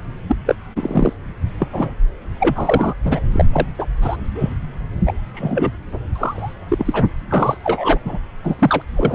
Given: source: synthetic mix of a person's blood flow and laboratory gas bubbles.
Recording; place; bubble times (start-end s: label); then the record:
Doppler ultrasound of blood flow; subclavian vein
0.28-0.36 s: bubbles
0.46-0.55 s: bubbles
0.76-1.13 s: bubbles
1.59-1.68 s: bubbles
1.72-1.90 s: bubbles
2.40-2.94 s: bubbles
3.05-3.21 s: bubbles
3.32-3.45 s: bubbles
3.52-3.67 s: bubbles
3.78-3.87 s: bubbles
4.01-4.17 s: bubbles
4.34-4.54 s: bubbles
5.05-5.13 s: bubbles
5.33-5.71 s: bubbles
6.16-6.52 s: bubbles
6.68-7.04 s: bubbles
7.30-7.57 s: bubbles
7.63-7.99 s: bubbles
8.05-8.18 s: bubbles
8.44-8.55 s: bubbles
8.58-8.82 s: bubbles
8.96-9.15 s: bubbles
From the record:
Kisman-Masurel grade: 243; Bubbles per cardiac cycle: several, 3 to 8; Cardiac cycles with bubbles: 100%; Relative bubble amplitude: loud (0.450 to 0.775); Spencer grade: 3 (all of the cardiac periods contain showers or single bubble signals, but not dominating or overriding the cardiac motion signals); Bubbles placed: anywhere in the cardiac cycle